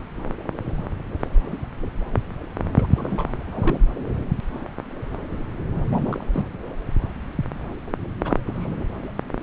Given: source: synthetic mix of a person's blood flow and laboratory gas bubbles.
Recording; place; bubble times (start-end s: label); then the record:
Doppler ultrasound of blood flow; subclavian vein
2.77-3.27 s: bubbles
3.47-3.79 s: bubbles
5.92-6.22 s: bubbles
6.32-6.45 s: bubbles
8.20-8.40 s: bubbles
8.47-8.67 s: bubbles
From the record:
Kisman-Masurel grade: 221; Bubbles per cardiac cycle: several, 3 to 8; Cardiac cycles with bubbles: 10 to 50%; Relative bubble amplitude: barely perceptible (0.100 to 0.250); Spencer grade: 2 (many but less than half of the cardiac periods contain bubble signals, singularly or in groups); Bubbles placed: anywhere in the cardiac cycle